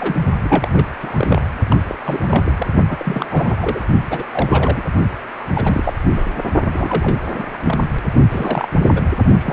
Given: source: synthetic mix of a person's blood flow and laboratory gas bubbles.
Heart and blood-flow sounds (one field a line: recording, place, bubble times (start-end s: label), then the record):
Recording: Doppler ultrasound of blood flow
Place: precordium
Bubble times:
0.00-0.16 s: bubbles
0.44-0.69 s: bubbles
0.72-0.87 s: bubbles
1.01-1.42 s: bubbles
1.70-1.77 s: bubbles
1.88-1.96 s: bubbles
2.04-2.67 s: bubbles
2.88-3.84 s: bubbles
4.10-4.25 s: bubbles
4.32-4.83 s: bubbles
5.39-5.44 s: bubbles
5.53-5.93 s: bubbles
6.14-6.26 s: bubbles
6.73-7.18 s: bubbles
7.33-7.43 s: bubbles
7.54-7.58 s: bubbles
7.65-7.79 s: bubbles
8.29-9.02 s: bubbles
9.38-9.53 s: bubbles
From the record:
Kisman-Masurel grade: 342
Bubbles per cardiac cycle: rolling drumbeat, 9 or more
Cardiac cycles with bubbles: 100%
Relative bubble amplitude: moderate (0.250 to 0.450)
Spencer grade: 3 (all of the cardiac periods contain showers or single bubble signals, but not dominating or overriding the cardiac motion signals)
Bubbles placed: only in the low amplitude regions of the cardiac cycle